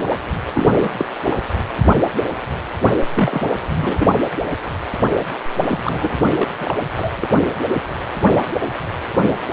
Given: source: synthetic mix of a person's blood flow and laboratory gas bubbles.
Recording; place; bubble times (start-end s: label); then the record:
Doppler ultrasound of blood flow; precordium
0.54-0.89 s: bubbles
0.98-1.06 s: bubbles
1.24-1.36 s: bubbles
3.14-3.56 s: bubbles
3.69-4.15 s: bubbles
5.68-6.17 s: bubbles
6.37-6.50 s: bubbles
6.59-6.77 s: bubbles
6.93-7.10 s: bubbles
7.17-7.28 s: bubbles
From the record:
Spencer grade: 2 (many but less than half of the cardiac periods contain bubble signals, singularly or in groups); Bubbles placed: anywhere in the cardiac cycle